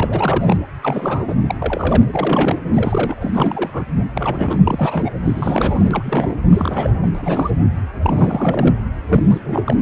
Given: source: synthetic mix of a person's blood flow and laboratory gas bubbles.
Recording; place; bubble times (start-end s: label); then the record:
Doppler ultrasound of blood flow; precordium
0.00-0.57 s: bubbles
0.82-1.36 s: bubbles
1.48-1.55 s: bubbles
1.59-2.06 s: bubbles
2.14-2.59 s: bubbles
2.73-3.18 s: bubbles
3.20-3.85 s: bubbles
4.14-4.61 s: bubbles
4.67-5.14 s: bubbles
5.24-6.36 s: bubbles
6.50-7.11 s: bubbles
7.14-7.50 s: bubbles
8.01-8.75 s: bubbles
9.09-9.25 s: bubbles
9.28-9.39 s: bubbles
9.51-9.73 s: bubbles
From the record:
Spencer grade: 3 (all of the cardiac periods contain showers or single bubble signals, but not dominating or overriding the cardiac motion signals); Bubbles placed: anywhere in the cardiac cycle